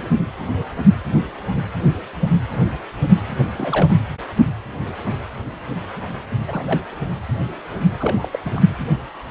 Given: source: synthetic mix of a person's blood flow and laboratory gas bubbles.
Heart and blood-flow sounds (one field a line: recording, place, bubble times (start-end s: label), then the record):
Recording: Doppler ultrasound of blood flow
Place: precordium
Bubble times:
3.57-3.95 s: bubbles
6.48-6.63 s: bubbles
6.66-6.80 s: bubbles
8.00-8.29 s: bubbles
8.32-8.39 s: bubbles
8.45-8.61 s: bubbles
From the record:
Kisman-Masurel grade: 221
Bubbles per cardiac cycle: several, 3 to 8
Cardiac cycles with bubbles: 10 to 50%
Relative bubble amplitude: barely perceptible (0.100 to 0.250)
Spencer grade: 2 (many but less than half of the cardiac periods contain bubble signals, singularly or in groups)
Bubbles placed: anywhere in the cardiac cycle